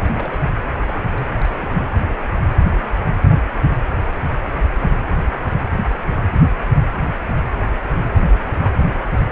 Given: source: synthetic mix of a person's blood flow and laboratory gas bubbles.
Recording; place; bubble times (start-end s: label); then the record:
Doppler ultrasound of blood flow; precordium
0.00-0.45 s: bubbles
0.75-1.30 s: bubbles
1.36-1.88 s: bubbles
8.21-8.38 s: bubbles
8.46-8.50 s: bubbles
8.54-8.67 s: bubbles
From the record:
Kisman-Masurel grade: 221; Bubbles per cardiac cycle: several, 3 to 8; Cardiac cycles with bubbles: 10 to 50%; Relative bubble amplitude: barely perceptible (0.100 to 0.250); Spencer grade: 2 (many but less than half of the cardiac periods contain bubble signals, singularly or in groups); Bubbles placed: anywhere in the cardiac cycle